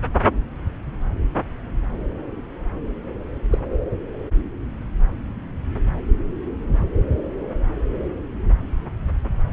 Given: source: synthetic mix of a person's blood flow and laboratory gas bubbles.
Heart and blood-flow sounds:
Doppler ultrasound of blood flow; subclavian vein
3.52-3.58 s: bubbles
From the record:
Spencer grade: 1 (occasional bubble signal discernible with the cardiac motion signal, with majority of cardiac periods free of bubbles); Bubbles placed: anywhere in the cardiac cycle

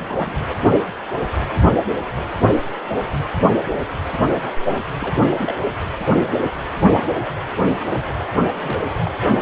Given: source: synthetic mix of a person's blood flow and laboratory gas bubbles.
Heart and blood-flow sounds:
Doppler ultrasound of blood flow; precordium
0.00-0.36 s: bubbles
5.00-5.23 s: bubbles
5.33-5.54 s: bubbles
8.36-8.43 s: bubbles
8.52-8.83 s: bubbles
8.94-9.11 s: bubbles
From the record:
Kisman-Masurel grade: 221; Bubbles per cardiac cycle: several, 3 to 8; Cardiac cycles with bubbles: 10 to 50%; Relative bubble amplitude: barely perceptible (0.100 to 0.250); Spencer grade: 2 (many but less than half of the cardiac periods contain bubble signals, singularly or in groups); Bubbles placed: anywhere in the cardiac cycle

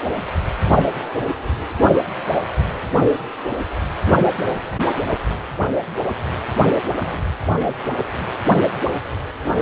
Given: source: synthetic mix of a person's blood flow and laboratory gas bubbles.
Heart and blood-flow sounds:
Doppler ultrasound of blood flow; precordium
6.97-7.30 s: bubbles
7.60-7.94 s: bubbles
From the record:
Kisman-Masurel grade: 121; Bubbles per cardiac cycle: 1 to 2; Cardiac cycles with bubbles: 10 to 50%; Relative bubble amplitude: barely perceptible (0.100 to 0.250); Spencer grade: 2 (many but less than half of the cardiac periods contain bubble signals, singularly or in groups); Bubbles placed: anywhere in the cardiac cycle

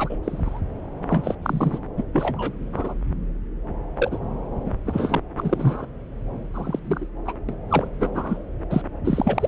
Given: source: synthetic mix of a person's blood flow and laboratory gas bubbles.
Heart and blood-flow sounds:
Doppler ultrasound of blood flow; subclavian vein
0.00-0.18 s: bubbles
0.23-0.60 s: bubbles
1.03-1.35 s: bubbles
1.43-1.78 s: bubbles
1.97-2.03 s: bubbles
2.13-2.52 s: bubbles
2.72-2.94 s: bubbles
3.96-4.18 s: bubbles
4.66-4.71 s: bubbles
4.86-5.21 s: bubbles
5.38-5.86 s: bubbles
6.54-6.79 s: bubbles
6.85-7.07 s: bubbles
7.25-7.33 s: bubbles
7.49-7.54 s: bubbles
7.69-7.88 s: bubbles
8.00-8.09 s: bubbles
8.14-8.42 s: bubbles
8.69-8.82 s: bubbles
9.04-9.48 s: bubbles
From the record:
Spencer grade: 3 (all of the cardiac periods contain showers or single bubble signals, but not dominating or overriding the cardiac motion signals); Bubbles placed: anywhere in the cardiac cycle

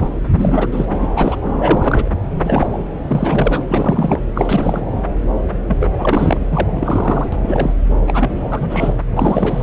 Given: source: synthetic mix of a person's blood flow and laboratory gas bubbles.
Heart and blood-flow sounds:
Doppler ultrasound of blood flow; subclavian vein
0.00-0.08 s: bubbles
0.29-0.86 s: bubbles
1.00-1.07 s: bubbles
1.16-1.40 s: bubbles
1.60-2.10 s: bubbles
2.44-2.68 s: bubbles
2.73-2.78 s: bubbles
3.08-3.65 s: bubbles
3.68-4.21 s: bubbles
4.35-4.82 s: bubbles
5.67-5.94 s: bubbles
5.98-6.38 s: bubbles
6.51-7.29 s: bubbles
7.32-7.74 s: bubbles
8.07-8.94 s: bubbles
9.16-9.63 s: bubbles
From the record:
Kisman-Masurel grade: 333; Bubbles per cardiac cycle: rolling drumbeat, 9 or more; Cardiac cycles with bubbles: 50 to 99%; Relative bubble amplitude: loud (0.450 to 0.775); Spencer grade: 3 (all of the cardiac periods contain showers or single bubble signals, but not dominating or overriding the cardiac motion signals); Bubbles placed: anywhere in the cardiac cycle

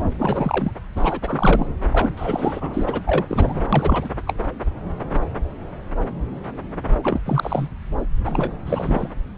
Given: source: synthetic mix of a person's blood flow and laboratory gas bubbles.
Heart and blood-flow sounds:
Doppler ultrasound of blood flow; subclavian vein
0.04-0.13 s: bubbles
0.18-0.74 s: bubbles
0.96-1.67 s: bubbles
1.91-2.12 s: bubbles
2.16-3.00 s: bubbles
3.06-3.25 s: bubbles
3.29-3.62 s: bubbles
3.73-4.09 s: bubbles
4.26-4.34 s: bubbles
7.03-7.20 s: bubbles
7.25-7.68 s: bubbles
8.25-8.53 s: bubbles
8.66-9.08 s: bubbles
From the record:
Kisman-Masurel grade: 333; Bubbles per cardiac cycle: rolling drumbeat, 9 or more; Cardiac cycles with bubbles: 50 to 99%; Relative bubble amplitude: loud (0.450 to 0.775); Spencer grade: 3 (all of the cardiac periods contain showers or single bubble signals, but not dominating or overriding the cardiac motion signals); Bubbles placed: anywhere in the cardiac cycle

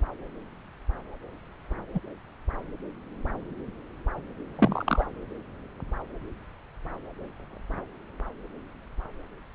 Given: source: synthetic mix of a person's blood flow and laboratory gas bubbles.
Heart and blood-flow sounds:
Doppler ultrasound of blood flow; subclavian vein
1.94-2.00 s: bubbles
4.55-5.05 s: bubbles
From the record:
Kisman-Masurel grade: 122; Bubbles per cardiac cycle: 1 to 2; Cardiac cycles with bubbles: 10 to 50%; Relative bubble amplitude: moderate (0.250 to 0.450); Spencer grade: 2 (many but less than half of the cardiac periods contain bubble signals, singularly or in groups); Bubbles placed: anywhere in the cardiac cycle

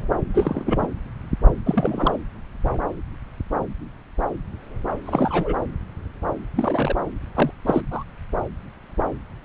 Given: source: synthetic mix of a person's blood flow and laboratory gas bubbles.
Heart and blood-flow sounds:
Doppler ultrasound of blood flow; subclavian vein
0.34-0.88 s: bubbles
1.66-2.18 s: bubbles
5.05-5.55 s: bubbles
6.55-6.96 s: bubbles
7.35-7.51 s: bubbles
7.65-7.81 s: bubbles
7.91-8.04 s: bubbles
From the record:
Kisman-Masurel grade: 222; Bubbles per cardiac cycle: several, 3 to 8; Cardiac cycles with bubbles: 10 to 50%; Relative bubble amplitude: moderate (0.250 to 0.450); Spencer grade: 2 (many but less than half of the cardiac periods contain bubble signals, singularly or in groups); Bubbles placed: anywhere in the cardiac cycle

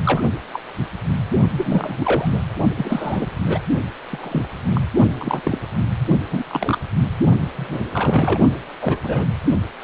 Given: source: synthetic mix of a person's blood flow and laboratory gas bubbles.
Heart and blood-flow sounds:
Doppler ultrasound of blood flow; precordium
0.05-0.23 s: bubbles
0.53-0.60 s: bubbles
1.56-2.43 s: bubbles
2.76-3.27 s: bubbles
3.40-3.60 s: bubbles
4.11-4.48 s: bubbles
4.71-4.81 s: bubbles
5.17-5.41 s: bubbles
5.45-5.58 s: bubbles
6.30-6.43 s: bubbles
6.48-6.79 s: bubbles
7.56-7.82 s: bubbles
7.94-8.41 s: bubbles
8.81-8.98 s: bubbles
9.03-9.26 s: bubbles
From the record:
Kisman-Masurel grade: 242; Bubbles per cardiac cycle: several, 3 to 8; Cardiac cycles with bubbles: 100%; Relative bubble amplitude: moderate (0.250 to 0.450); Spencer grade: 3 (all of the cardiac periods contain showers or single bubble signals, but not dominating or overriding the cardiac motion signals); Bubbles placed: only in the low amplitude regions of the cardiac cycle

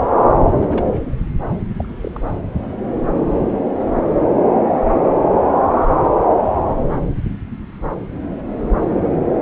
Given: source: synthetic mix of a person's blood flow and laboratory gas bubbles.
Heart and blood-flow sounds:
Doppler ultrasound of blood flow; subclavian vein
0.59-0.97 s: bubbles
1.78-1.97 s: bubbles
2.00-2.21 s: bubbles
From the record:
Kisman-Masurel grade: 221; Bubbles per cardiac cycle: several, 3 to 8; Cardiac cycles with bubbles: 10 to 50%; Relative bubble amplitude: barely perceptible (0.100 to 0.250); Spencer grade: 2 (many but less than half of the cardiac periods contain bubble signals, singularly or in groups); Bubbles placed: anywhere in the cardiac cycle

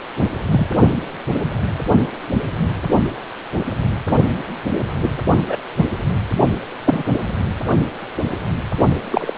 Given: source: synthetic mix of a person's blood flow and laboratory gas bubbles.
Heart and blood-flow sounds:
Doppler ultrasound of blood flow; precordium
0.51-0.67 s: bubbles
4.75-4.80 s: bubbles
5.01-5.10 s: bubbles
5.47-5.56 s: bubbles
5.76-5.84 s: bubbles
6.84-7.02 s: bubbles
9.11-9.32 s: bubbles
From the record:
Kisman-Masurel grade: 123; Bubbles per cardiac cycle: 1 to 2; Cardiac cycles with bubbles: 10 to 50%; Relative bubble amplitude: loud (0.450 to 0.775); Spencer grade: 2 (many but less than half of the cardiac periods contain bubble signals, singularly or in groups); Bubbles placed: only in the low amplitude regions of the cardiac cycle

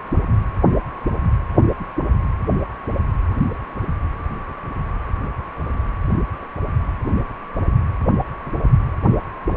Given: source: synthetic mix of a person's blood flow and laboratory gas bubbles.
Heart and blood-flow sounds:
Doppler ultrasound of blood flow; precordium
no bubbles
From the record:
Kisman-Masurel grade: 000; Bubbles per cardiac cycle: 0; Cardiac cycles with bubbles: 0%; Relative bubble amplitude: no bubbles discernible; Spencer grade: 0 (complete lack of bubble signals)

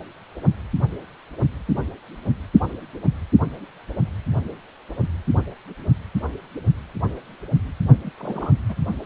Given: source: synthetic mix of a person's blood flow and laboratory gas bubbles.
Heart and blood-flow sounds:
Doppler ultrasound of blood flow; precordium
8.04-8.10 s: bubbles
8.18-8.52 s: bubbles
8.69-8.75 s: bubbles
From the record:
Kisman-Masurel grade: 211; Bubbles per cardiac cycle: several, 3 to 8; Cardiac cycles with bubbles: 1 to 10%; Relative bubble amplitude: barely perceptible (0.100 to 0.250); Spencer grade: 1 (occasional bubble signal discernible with the cardiac motion signal, with majority of cardiac periods free of bubbles); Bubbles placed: only in the low amplitude regions of the cardiac cycle

